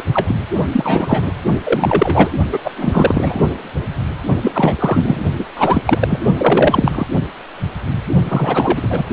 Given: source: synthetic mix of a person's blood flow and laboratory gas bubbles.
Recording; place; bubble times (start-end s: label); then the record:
Doppler ultrasound of blood flow; precordium
0.00-0.02 s: bubbles
0.14-0.36 s: bubbles
0.71-1.35 s: bubbles
1.64-2.31 s: bubbles
2.52-2.58 s: bubbles
2.64-3.41 s: bubbles
4.42-5.20 s: bubbles
5.38-5.46 s: bubbles
5.56-5.83 s: bubbles
5.85-6.20 s: bubbles
6.38-7.07 s: bubbles
8.29-9.04 s: bubbles
From the record:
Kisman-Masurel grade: 333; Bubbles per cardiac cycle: rolling drumbeat, 9 or more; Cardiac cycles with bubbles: 50 to 99%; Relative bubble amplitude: loud (0.450 to 0.775); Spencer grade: 3 (all of the cardiac periods contain showers or single bubble signals, but not dominating or overriding the cardiac motion signals); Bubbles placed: only in the low amplitude regions of the cardiac cycle